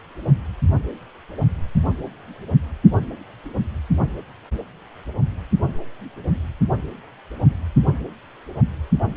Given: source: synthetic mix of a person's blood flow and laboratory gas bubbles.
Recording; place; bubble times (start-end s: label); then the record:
Doppler ultrasound of blood flow; precordium
no bubbles
From the record:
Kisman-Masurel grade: 000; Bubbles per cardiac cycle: 0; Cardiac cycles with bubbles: 0%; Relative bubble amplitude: no bubbles discernible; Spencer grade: 0 (complete lack of bubble signals)